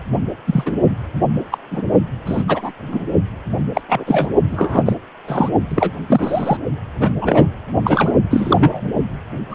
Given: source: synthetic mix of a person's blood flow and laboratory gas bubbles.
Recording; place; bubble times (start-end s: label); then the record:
Doppler ultrasound of blood flow; precordium
0.47-0.74 s: bubbles
1.51-1.58 s: bubbles
1.71-1.82 s: bubbles
2.25-2.43 s: bubbles
2.48-2.71 s: bubbles
2.88-3.03 s: bubbles
3.74-3.81 s: bubbles
3.88-4.29 s: bubbles
4.50-4.83 s: bubbles
4.86-4.94 s: bubbles
5.27-5.50 s: bubbles
5.70-5.91 s: bubbles
6.07-6.57 s: bubbles
6.99-7.12 s: bubbles
7.21-7.48 s: bubbles
7.84-8.12 s: bubbles
8.30-8.93 s: bubbles
9.50-9.55 s: bubbles
From the record:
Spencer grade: 3 (all of the cardiac periods contain showers or single bubble signals, but not dominating or overriding the cardiac motion signals); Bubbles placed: only in the low amplitude regions of the cardiac cycle